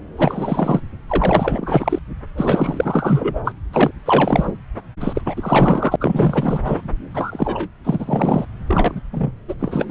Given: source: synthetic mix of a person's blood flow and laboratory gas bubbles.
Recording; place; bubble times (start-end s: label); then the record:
Doppler ultrasound of blood flow; subclavian vein
0.17-0.81 s: bubbles
1.07-1.99 s: bubbles
2.37-3.42 s: bubbles
3.45-3.54 s: bubbles
3.72-3.91 s: bubbles
4.05-4.54 s: bubbles
5.00-5.22 s: bubbles
5.25-5.96 s: bubbles
6.00-6.59 s: bubbles
6.64-6.81 s: bubbles
7.14-7.68 s: bubbles
7.84-8.45 s: bubbles
8.67-9.02 s: bubbles
9.11-9.32 s: bubbles
9.48-9.54 s: bubbles
9.59-9.91 s: bubbles
From the record:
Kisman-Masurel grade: 444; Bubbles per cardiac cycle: continuous sound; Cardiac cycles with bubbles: 100%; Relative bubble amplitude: maximal (0.775 to 0.999); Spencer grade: 4 (maximum detectable bubble signal sounding continuously throughout systole and diastole of every cardiac period, and overriding the amplitude of the normal cardiac signals); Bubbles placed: anywhere in the cardiac cycle